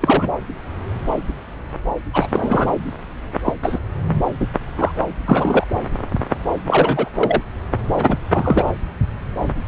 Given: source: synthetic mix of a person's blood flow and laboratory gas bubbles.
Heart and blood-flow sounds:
Doppler ultrasound of blood flow; subclavian vein
0.01-0.38 s: bubbles
2.13-2.71 s: bubbles
3.44-3.52 s: bubbles
3.62-3.79 s: bubbles
4.40-4.46 s: bubbles
4.77-4.92 s: bubbles
5.25-5.67 s: bubbles
6.67-7.08 s: bubbles
7.16-7.41 s: bubbles
7.96-8.19 s: bubbles
8.33-8.71 s: bubbles
From the record:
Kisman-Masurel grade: 223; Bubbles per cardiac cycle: several, 3 to 8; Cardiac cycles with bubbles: 10 to 50%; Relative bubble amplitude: loud (0.450 to 0.775); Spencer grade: 2 (many but less than half of the cardiac periods contain bubble signals, singularly or in groups); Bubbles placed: anywhere in the cardiac cycle

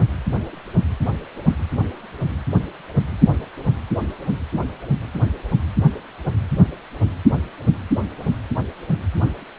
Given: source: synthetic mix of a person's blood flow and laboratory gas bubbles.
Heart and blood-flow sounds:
Doppler ultrasound of blood flow; precordium
no bubbles
From the record:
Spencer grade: 0 (complete lack of bubble signals)

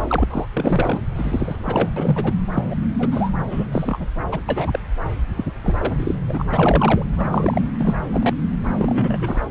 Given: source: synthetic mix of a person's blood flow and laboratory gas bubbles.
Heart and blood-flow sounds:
Doppler ultrasound of blood flow; subclavian vein
0.08-0.25 s: bubbles
0.30-0.46 s: bubbles
0.53-0.99 s: bubbles
1.16-1.90 s: bubbles
1.96-2.33 s: bubbles
2.54-2.64 s: bubbles
2.70-2.75 s: bubbles
2.99-3.32 s: bubbles
3.50-3.66 s: bubbles
3.71-4.07 s: bubbles
4.31-4.40 s: bubbles
4.49-4.79 s: bubbles
5.36-5.45 s: bubbles
5.63-5.96 s: bubbles
5.98-6.16 s: bubbles
6.29-6.46 s: bubbles
6.51-7.06 s: bubbles
7.17-7.62 s: bubbles
7.78-7.94 s: bubbles
8.12-8.34 s: bubbles
8.76-9.42 s: bubbles
From the record:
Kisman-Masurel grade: 242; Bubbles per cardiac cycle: several, 3 to 8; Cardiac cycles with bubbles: 100%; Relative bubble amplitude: moderate (0.250 to 0.450); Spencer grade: 3 (all of the cardiac periods contain showers or single bubble signals, but not dominating or overriding the cardiac motion signals); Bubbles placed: anywhere in the cardiac cycle

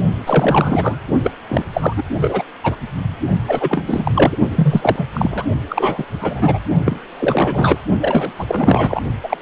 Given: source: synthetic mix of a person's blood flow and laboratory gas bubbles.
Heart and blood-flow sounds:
Doppler ultrasound of blood flow; precordium
0.26-0.99 s: bubbles
1.23-1.31 s: bubbles
1.49-1.64 s: bubbles
1.73-1.93 s: bubbles
1.97-2.03 s: bubbles
2.21-2.42 s: bubbles
2.63-2.77 s: bubbles
3.47-4.12 s: bubbles
4.14-4.38 s: bubbles
4.56-5.08 s: bubbles
5.13-5.44 s: bubbles
5.69-6.06 s: bubbles
6.11-6.59 s: bubbles
6.85-7.00 s: bubbles
7.20-7.80 s: bubbles
8.01-8.31 s: bubbles
8.38-9.00 s: bubbles
9.23-9.37 s: bubbles
From the record:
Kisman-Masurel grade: 343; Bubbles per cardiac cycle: rolling drumbeat, 9 or more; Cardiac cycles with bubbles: 100%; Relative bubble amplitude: loud (0.450 to 0.775); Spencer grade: 3 (all of the cardiac periods contain showers or single bubble signals, but not dominating or overriding the cardiac motion signals); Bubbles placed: only in the low amplitude regions of the cardiac cycle

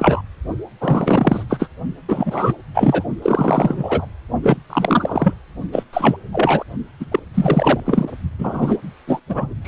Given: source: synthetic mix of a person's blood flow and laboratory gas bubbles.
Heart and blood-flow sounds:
Doppler ultrasound of blood flow; precordium
0.00-0.21 s: bubbles
0.80-1.44 s: bubbles
1.49-1.68 s: bubbles
2.08-2.53 s: bubbles
2.74-3.04 s: bubbles
3.22-4.07 s: bubbles
4.43-4.57 s: bubbles
4.70-5.33 s: bubbles
5.73-5.83 s: bubbles
5.93-6.17 s: bubbles
6.33-6.63 s: bubbles
7.00-7.05 s: bubbles
7.11-7.20 s: bubbles
7.34-7.80 s: bubbles
7.86-8.09 s: bubbles
8.38-8.78 s: bubbles
9.07-9.20 s: bubbles
9.29-9.54 s: bubbles
9.64-9.68 s: bubbles
From the record:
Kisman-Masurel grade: 333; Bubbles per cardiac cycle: rolling drumbeat, 9 or more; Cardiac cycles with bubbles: 50 to 99%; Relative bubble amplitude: loud (0.450 to 0.775); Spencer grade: 3 (all of the cardiac periods contain showers or single bubble signals, but not dominating or overriding the cardiac motion signals); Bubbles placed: only in the low amplitude regions of the cardiac cycle

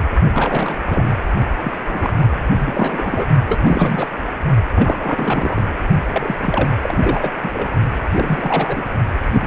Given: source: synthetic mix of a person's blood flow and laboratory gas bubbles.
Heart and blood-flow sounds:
Doppler ultrasound of blood flow; precordium
0.33-0.79 s: bubbles
0.90-1.15 s: bubbles
1.61-1.73 s: bubbles
1.81-2.27 s: bubbles
2.29-3.25 s: bubbles
3.48-3.60 s: bubbles
3.62-4.07 s: bubbles
4.75-5.61 s: bubbles
6.12-6.36 s: bubbles
6.42-6.70 s: bubbles
6.82-7.31 s: bubbles
7.42-7.50 s: bubbles
7.53-7.68 s: bubbles
8.12-8.83 s: bubbles
9.33-9.47 s: bubbles
From the record:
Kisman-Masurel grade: 342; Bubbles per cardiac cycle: rolling drumbeat, 9 or more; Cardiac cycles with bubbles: 100%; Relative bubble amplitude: moderate (0.250 to 0.450); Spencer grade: 3 (all of the cardiac periods contain showers or single bubble signals, but not dominating or overriding the cardiac motion signals); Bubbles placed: only in the low amplitude regions of the cardiac cycle

